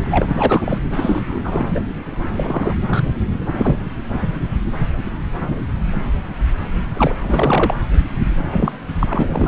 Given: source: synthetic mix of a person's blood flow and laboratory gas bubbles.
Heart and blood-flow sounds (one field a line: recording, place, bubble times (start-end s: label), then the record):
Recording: Doppler ultrasound of blood flow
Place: subclavian vein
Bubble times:
0.00-0.28 s: bubbles
0.32-0.80 s: bubbles
0.92-1.80 s: bubbles
2.35-2.75 s: bubbles
2.88-3.03 s: bubbles
3.51-3.85 s: bubbles
6.94-7.15 s: bubbles
7.25-7.75 s: bubbles
8.38-8.72 s: bubbles
8.99-9.47 s: bubbles
From the record:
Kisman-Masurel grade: 332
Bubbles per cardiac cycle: rolling drumbeat, 9 or more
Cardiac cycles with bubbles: 50 to 99%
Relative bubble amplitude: moderate (0.250 to 0.450)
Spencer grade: 3 (all of the cardiac periods contain showers or single bubble signals, but not dominating or overriding the cardiac motion signals)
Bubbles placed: anywhere in the cardiac cycle